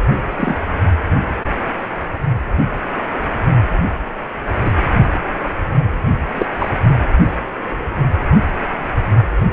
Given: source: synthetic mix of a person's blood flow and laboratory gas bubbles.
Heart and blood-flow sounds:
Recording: Doppler ultrasound of blood flow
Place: precordium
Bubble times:
0.37-0.56 s: bubbles
4.65-4.71 s: bubbles
6.35-6.47 s: bubbles
6.58-6.70 s: bubbles
From the record:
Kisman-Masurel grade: 123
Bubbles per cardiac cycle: 1 to 2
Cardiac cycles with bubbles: 10 to 50%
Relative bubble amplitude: loud (0.450 to 0.775)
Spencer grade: 2 (many but less than half of the cardiac periods contain bubble signals, singularly or in groups)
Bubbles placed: anywhere in the cardiac cycle

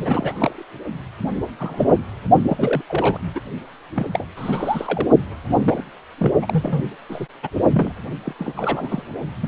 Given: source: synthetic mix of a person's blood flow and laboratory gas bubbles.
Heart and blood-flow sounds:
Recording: Doppler ultrasound of blood flow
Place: precordium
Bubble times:
0.01-0.63 s: bubbles
1.58-1.98 s: bubbles
2.42-2.83 s: bubbles
2.88-3.20 s: bubbles
3.35-3.41 s: bubbles
3.96-4.07 s: bubbles
4.13-4.26 s: bubbles
4.37-5.06 s: bubbles
5.46-5.84 s: bubbles
6.17-6.33 s: bubbles
6.42-6.88 s: bubbles
7.09-7.26 s: bubbles
7.42-7.49 s: bubbles
7.72-7.92 s: bubbles
8.25-8.34 s: bubbles
8.38-8.54 s: bubbles
8.56-9.03 s: bubbles
9.41-9.48 s: bubbles
From the record:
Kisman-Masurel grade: 242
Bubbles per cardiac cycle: several, 3 to 8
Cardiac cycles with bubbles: 100%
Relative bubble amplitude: moderate (0.250 to 0.450)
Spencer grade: 3 (all of the cardiac periods contain showers or single bubble signals, but not dominating or overriding the cardiac motion signals)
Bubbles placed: only in the low amplitude regions of the cardiac cycle

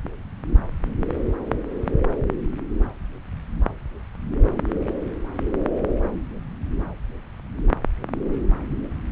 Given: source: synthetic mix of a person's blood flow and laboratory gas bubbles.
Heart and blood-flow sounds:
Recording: Doppler ultrasound of blood flow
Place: subclavian vein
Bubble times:
no bubbles
From the record:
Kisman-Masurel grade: 000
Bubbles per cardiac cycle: 0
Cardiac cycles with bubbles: 0%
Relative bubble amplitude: no bubbles discernible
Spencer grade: 0 (complete lack of bubble signals)

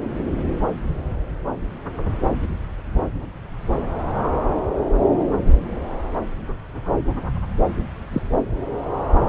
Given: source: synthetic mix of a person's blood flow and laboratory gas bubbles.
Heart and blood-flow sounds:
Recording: Doppler ultrasound of blood flow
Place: subclavian vein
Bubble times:
8.12-8.21 s: bubbles
From the record:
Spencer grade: 1 (occasional bubble signal discernible with the cardiac motion signal, with majority of cardiac periods free of bubbles)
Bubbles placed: anywhere in the cardiac cycle

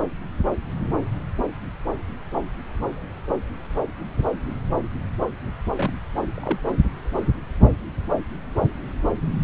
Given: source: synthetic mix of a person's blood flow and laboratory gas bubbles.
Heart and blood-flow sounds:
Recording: Doppler ultrasound of blood flow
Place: subclavian vein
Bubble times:
5.76-5.92 s: bubbles
6.37-6.58 s: bubbles
From the record:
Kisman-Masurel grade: 111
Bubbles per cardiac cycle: 1 to 2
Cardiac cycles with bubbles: 1 to 10%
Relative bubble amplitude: barely perceptible (0.100 to 0.250)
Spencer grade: 1 (occasional bubble signal discernible with the cardiac motion signal, with majority of cardiac periods free of bubbles)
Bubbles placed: anywhere in the cardiac cycle

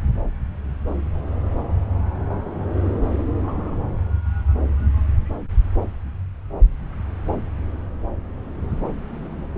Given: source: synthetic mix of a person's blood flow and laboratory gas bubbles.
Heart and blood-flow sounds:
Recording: Doppler ultrasound of blood flow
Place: subclavian vein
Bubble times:
3.39-3.77 s: bubbles
From the record:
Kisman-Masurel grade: 111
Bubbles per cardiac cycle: 1 to 2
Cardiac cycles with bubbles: 1 to 10%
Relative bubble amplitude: barely perceptible (0.100 to 0.250)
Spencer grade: 1 (occasional bubble signal discernible with the cardiac motion signal, with majority of cardiac periods free of bubbles)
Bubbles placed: anywhere in the cardiac cycle

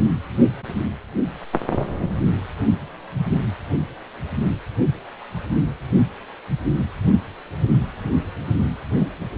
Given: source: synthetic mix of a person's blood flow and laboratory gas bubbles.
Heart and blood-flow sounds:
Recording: Doppler ultrasound of blood flow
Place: precordium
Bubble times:
no bubbles
From the record:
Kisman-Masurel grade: 000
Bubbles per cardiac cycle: 0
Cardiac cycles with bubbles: 0%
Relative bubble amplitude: no bubbles discernible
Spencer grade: 0 (complete lack of bubble signals)

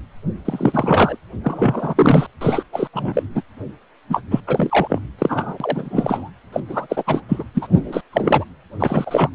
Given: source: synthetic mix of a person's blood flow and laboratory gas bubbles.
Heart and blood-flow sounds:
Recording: Doppler ultrasound of blood flow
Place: precordium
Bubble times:
0.45-1.17 s: bubbles
1.44-2.26 s: bubbles
2.41-2.63 s: bubbles
2.72-2.88 s: bubbles
2.93-3.23 s: bubbles
3.34-3.42 s: bubbles
4.10-4.21 s: bubbles
4.31-4.41 s: bubbles
4.47-5.00 s: bubbles
5.18-5.58 s: bubbles
5.60-6.30 s: bubbles
6.53-6.61 s: bubbles
6.68-7.04 s: bubbles
7.07-7.22 s: bubbles
7.29-7.44 s: bubbles
7.54-7.68 s: bubbles
7.72-8.01 s: bubbles
8.12-8.45 s: bubbles
8.79-9.29 s: bubbles
From the record:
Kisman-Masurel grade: 343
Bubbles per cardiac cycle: rolling drumbeat, 9 or more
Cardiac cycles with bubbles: 100%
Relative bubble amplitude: loud (0.450 to 0.775)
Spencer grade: 3 (all of the cardiac periods contain showers or single bubble signals, but not dominating or overriding the cardiac motion signals)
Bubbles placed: anywhere in the cardiac cycle

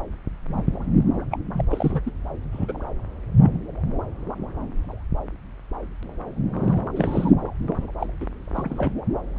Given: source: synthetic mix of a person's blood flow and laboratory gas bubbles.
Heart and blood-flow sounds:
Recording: Doppler ultrasound of blood flow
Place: subclavian vein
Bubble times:
1.31-1.40 s: bubbles
1.52-1.65 s: bubbles
1.70-2.01 s: bubbles
2.06-2.11 s: bubbles
2.52-2.73 s: bubbles
3.37-3.58 s: bubbles
6.52-6.81 s: bubbles
6.96-7.32 s: bubbles
7.68-7.88 s: bubbles
7.99-8.06 s: bubbles
8.21-8.27 s: bubbles
8.54-8.95 s: bubbles
From the record:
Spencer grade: 2 (many but less than half of the cardiac periods contain bubble signals, singularly or in groups)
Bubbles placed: anywhere in the cardiac cycle

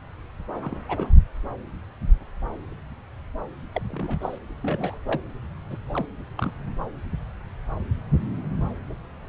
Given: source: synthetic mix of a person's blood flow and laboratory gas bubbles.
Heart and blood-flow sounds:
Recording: Doppler ultrasound of blood flow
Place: subclavian vein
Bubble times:
0.62-0.77 s: bubbles
0.89-1.07 s: bubbles
3.73-3.81 s: bubbles
3.90-4.19 s: bubbles
4.21-4.39 s: bubbles
4.62-4.99 s: bubbles
5.06-5.21 s: bubbles
5.70-5.78 s: bubbles
5.86-6.06 s: bubbles
6.37-6.52 s: bubbles
From the record:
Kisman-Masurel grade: 221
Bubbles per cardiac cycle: several, 3 to 8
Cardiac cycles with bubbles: 10 to 50%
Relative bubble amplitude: barely perceptible (0.100 to 0.250)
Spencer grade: 2 (many but less than half of the cardiac periods contain bubble signals, singularly or in groups)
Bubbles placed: anywhere in the cardiac cycle

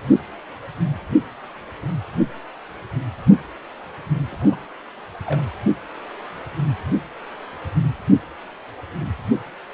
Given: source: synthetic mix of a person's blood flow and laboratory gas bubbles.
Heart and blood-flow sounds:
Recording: Doppler ultrasound of blood flow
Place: precordium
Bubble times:
4.32-4.60 s: bubbles
5.26-5.41 s: bubbles
From the record:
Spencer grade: 1 (occasional bubble signal discernible with the cardiac motion signal, with majority of cardiac periods free of bubbles)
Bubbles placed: anywhere in the cardiac cycle

